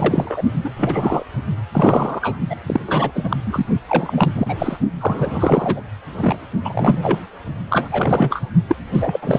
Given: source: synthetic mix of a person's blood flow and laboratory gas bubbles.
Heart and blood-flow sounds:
Doppler ultrasound of blood flow; precordium
0.00-0.42 s: bubbles
0.64-0.71 s: bubbles
0.76-1.23 s: bubbles
1.73-2.38 s: bubbles
2.50-2.56 s: bubbles
2.67-2.80 s: bubbles
2.87-3.12 s: bubbles
3.15-3.37 s: bubbles
3.44-3.66 s: bubbles
3.88-4.32 s: bubbles
4.34-4.77 s: bubbles
5.00-5.82 s: bubbles
6.20-6.36 s: bubbles
6.65-7.19 s: bubbles
7.68-7.88 s: bubbles
7.92-8.42 s: bubbles
8.68-8.75 s: bubbles
8.94-9.39 s: bubbles
From the record:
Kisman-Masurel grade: 342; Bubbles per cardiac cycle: rolling drumbeat, 9 or more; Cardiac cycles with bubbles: 100%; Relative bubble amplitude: moderate (0.250 to 0.450); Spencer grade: 3 (all of the cardiac periods contain showers or single bubble signals, but not dominating or overriding the cardiac motion signals); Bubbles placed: only in the low amplitude regions of the cardiac cycle

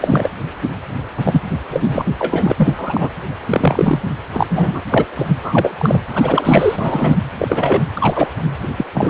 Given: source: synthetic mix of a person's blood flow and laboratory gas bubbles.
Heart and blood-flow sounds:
Doppler ultrasound of blood flow; precordium
0.00-0.30 s: bubbles
1.17-1.43 s: bubbles
1.70-2.04 s: bubbles
2.19-2.52 s: bubbles
2.56-3.09 s: bubbles
3.49-4.04 s: bubbles
4.33-4.46 s: bubbles
4.50-4.80 s: bubbles
4.91-5.05 s: bubbles
5.17-5.34 s: bubbles
5.42-5.99 s: bubbles
6.13-7.17 s: bubbles
7.39-7.83 s: bubbles
7.95-8.29 s: bubbles
8.62-8.69 s: bubbles
8.77-8.85 s: bubbles
8.94-9.10 s: bubbles
From the record:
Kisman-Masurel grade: 243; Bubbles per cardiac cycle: several, 3 to 8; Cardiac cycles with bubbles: 100%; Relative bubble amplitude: loud (0.450 to 0.775); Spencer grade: 3 (all of the cardiac periods contain showers or single bubble signals, but not dominating or overriding the cardiac motion signals); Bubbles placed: anywhere in the cardiac cycle

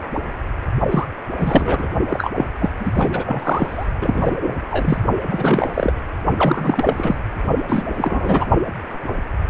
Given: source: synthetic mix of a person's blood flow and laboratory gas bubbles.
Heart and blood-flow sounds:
Doppler ultrasound of blood flow; precordium
0.90-1.06 s: bubbles
1.38-1.88 s: bubbles
2.09-2.31 s: bubbles
2.35-2.45 s: bubbles
2.59-2.69 s: bubbles
2.78-2.92 s: bubbles
2.94-3.87 s: bubbles
4.01-4.37 s: bubbles
4.41-4.56 s: bubbles
4.70-4.97 s: bubbles
5.29-5.93 s: bubbles
6.38-7.22 s: bubbles
7.67-8.46 s: bubbles
From the record:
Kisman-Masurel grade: 333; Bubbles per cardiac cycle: rolling drumbeat, 9 or more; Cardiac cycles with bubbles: 50 to 99%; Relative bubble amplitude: loud (0.450 to 0.775); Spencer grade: 3 (all of the cardiac periods contain showers or single bubble signals, but not dominating or overriding the cardiac motion signals); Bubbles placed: only in the low amplitude regions of the cardiac cycle

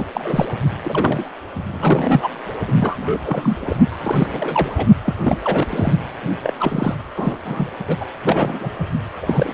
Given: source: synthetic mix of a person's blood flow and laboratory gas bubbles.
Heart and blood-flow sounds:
Doppler ultrasound of blood flow; precordium
0.00-0.07 s: bubbles
0.12-0.46 s: bubbles
0.82-1.30 s: bubbles
1.70-2.28 s: bubbles
2.67-3.19 s: bubbles
3.23-3.57 s: bubbles
3.60-3.76 s: bubbles
3.91-4.86 s: bubbles
5.04-5.15 s: bubbles
5.22-5.36 s: bubbles
5.44-5.67 s: bubbles
5.70-5.94 s: bubbles
6.43-6.54 s: bubbles
6.59-6.95 s: bubbles
7.16-7.38 s: bubbles
7.45-7.70 s: bubbles
7.87-7.96 s: bubbles
8.00-8.04 s: bubbles
8.22-8.72 s: bubbles
8.79-8.87 s: bubbles
9.16-9.54 s: bubbles
From the record:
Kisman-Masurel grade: 342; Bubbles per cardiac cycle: rolling drumbeat, 9 or more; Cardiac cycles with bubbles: 100%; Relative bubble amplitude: moderate (0.250 to 0.450); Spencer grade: 3 (all of the cardiac periods contain showers or single bubble signals, but not dominating or overriding the cardiac motion signals); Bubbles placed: only in the low amplitude regions of the cardiac cycle

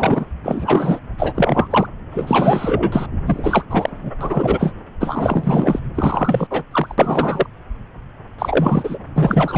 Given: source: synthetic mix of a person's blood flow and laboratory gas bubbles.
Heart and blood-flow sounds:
Doppler ultrasound of blood flow; subclavian vein
0.00-0.26 s: bubbles
0.44-0.99 s: bubbles
1.18-1.87 s: bubbles
2.11-3.06 s: bubbles
3.25-3.65 s: bubbles
3.70-4.12 s: bubbles
4.21-4.72 s: bubbles
5.00-5.79 s: bubbles
5.95-6.47 s: bubbles
6.50-6.63 s: bubbles
6.71-6.95 s: bubbles
6.98-7.46 s: bubbles
8.38-8.99 s: bubbles
9.14-9.58 s: bubbles
From the record:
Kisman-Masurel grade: 333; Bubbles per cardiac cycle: rolling drumbeat, 9 or more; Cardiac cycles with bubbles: 50 to 99%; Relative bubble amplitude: loud (0.450 to 0.775); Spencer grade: 3 (all of the cardiac periods contain showers or single bubble signals, but not dominating or overriding the cardiac motion signals); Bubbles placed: anywhere in the cardiac cycle

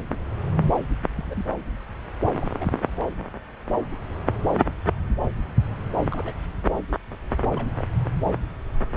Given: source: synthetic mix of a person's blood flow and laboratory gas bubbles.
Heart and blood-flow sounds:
Doppler ultrasound of blood flow; subclavian vein
1.16-1.46 s: bubbles
2.35-2.47 s: bubbles
2.58-2.85 s: bubbles
2.99-3.15 s: bubbles
5.99-6.04 s: bubbles
6.11-6.33 s: bubbles
7.40-7.69 s: bubbles
7.78-7.84 s: bubbles
From the record:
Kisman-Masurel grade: 221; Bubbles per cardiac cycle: several, 3 to 8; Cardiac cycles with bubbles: 10 to 50%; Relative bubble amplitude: barely perceptible (0.100 to 0.250); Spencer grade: 2 (many but less than half of the cardiac periods contain bubble signals, singularly or in groups); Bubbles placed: anywhere in the cardiac cycle

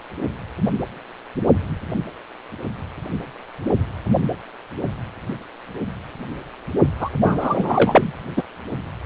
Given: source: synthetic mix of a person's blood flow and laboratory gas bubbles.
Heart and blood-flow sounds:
Doppler ultrasound of blood flow; precordium
7.00-7.09 s: bubbles
7.23-8.12 s: bubbles
8.37-8.44 s: bubbles
From the record:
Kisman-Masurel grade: 213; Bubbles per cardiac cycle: several, 3 to 8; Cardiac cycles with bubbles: 1 to 10%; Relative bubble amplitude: loud (0.450 to 0.775); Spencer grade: 1 (occasional bubble signal discernible with the cardiac motion signal, with majority of cardiac periods free of bubbles); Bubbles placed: only in the low amplitude regions of the cardiac cycle

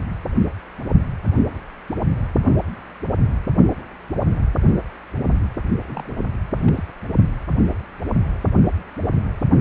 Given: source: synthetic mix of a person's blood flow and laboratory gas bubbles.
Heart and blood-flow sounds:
Doppler ultrasound of blood flow; precordium
5.83-6.13 s: bubbles
6.16-6.23 s: bubbles
6.57-6.84 s: bubbles
From the record:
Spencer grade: 1 (occasional bubble signal discernible with the cardiac motion signal, with majority of cardiac periods free of bubbles); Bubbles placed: only in the low amplitude regions of the cardiac cycle

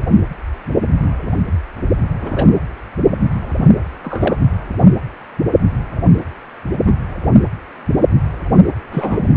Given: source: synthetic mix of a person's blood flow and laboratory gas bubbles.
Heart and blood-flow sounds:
Doppler ultrasound of blood flow; precordium
2.21-2.48 s: bubbles
3.57-3.66 s: bubbles
4.04-4.37 s: bubbles
6.85-6.92 s: bubbles
8.91-9.19 s: bubbles
From the record:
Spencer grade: 2 (many but less than half of the cardiac periods contain bubble signals, singularly or in groups); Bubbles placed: anywhere in the cardiac cycle

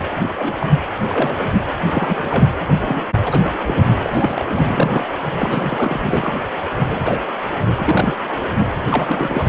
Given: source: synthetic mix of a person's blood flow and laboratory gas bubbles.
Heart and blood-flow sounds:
Doppler ultrasound of blood flow; precordium
0.36-0.72 s: bubbles
1.08-1.47 s: bubbles
1.80-2.46 s: bubbles
2.84-3.02 s: bubbles
3.21-3.54 s: bubbles
3.67-4.44 s: bubbles
4.49-5.05 s: bubbles
5.35-6.00 s: bubbles
6.05-6.33 s: bubbles
6.81-7.18 s: bubbles
7.77-8.17 s: bubbles
8.57-8.71 s: bubbles
8.77-9.47 s: bubbles
From the record:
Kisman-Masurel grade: 232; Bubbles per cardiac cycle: several, 3 to 8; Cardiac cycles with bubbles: 50 to 99%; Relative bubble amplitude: moderate (0.250 to 0.450); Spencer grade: 3 (all of the cardiac periods contain showers or single bubble signals, but not dominating or overriding the cardiac motion signals); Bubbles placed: anywhere in the cardiac cycle

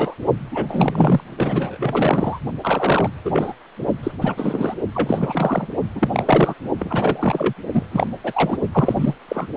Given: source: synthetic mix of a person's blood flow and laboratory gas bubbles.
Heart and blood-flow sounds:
Doppler ultrasound of blood flow; precordium
0.00-0.15 s: bubbles
0.51-1.21 s: bubbles
1.37-2.39 s: bubbles
2.61-3.09 s: bubbles
3.24-3.53 s: bubbles
4.03-4.12 s: bubbles
4.21-4.75 s: bubbles
4.94-5.67 s: bubbles
5.95-6.54 s: bubbles
6.79-7.54 s: bubbles
7.72-7.83 s: bubbles
7.91-8.07 s: bubbles
8.24-8.58 s: bubbles
8.72-9.14 s: bubbles
9.28-9.47 s: bubbles
From the record:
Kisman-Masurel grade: 343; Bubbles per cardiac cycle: rolling drumbeat, 9 or more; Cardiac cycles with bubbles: 100%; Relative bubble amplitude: loud (0.450 to 0.775); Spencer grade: 3 (all of the cardiac periods contain showers or single bubble signals, but not dominating or overriding the cardiac motion signals); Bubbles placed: only in the low amplitude regions of the cardiac cycle

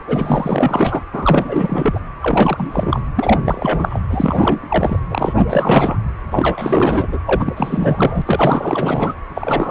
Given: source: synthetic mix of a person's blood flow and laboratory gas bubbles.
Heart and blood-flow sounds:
Doppler ultrasound of blood flow; precordium
0.07-1.03 s: bubbles
1.12-1.99 s: bubbles
2.20-3.02 s: bubbles
3.15-3.42 s: bubbles
3.45-4.01 s: bubbles
4.10-4.60 s: bubbles
4.69-4.99 s: bubbles
5.09-5.98 s: bubbles
6.31-7.19 s: bubbles
7.26-8.22 s: bubbles
8.25-9.14 s: bubbles
9.35-9.71 s: bubbles
From the record:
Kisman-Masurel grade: 444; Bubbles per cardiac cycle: continuous sound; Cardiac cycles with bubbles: 100%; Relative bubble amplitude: maximal (0.775 to 0.999); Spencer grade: 4 (maximum detectable bubble signal sounding continuously throughout systole and diastole of every cardiac period, and overriding the amplitude of the normal cardiac signals); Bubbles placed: anywhere in the cardiac cycle

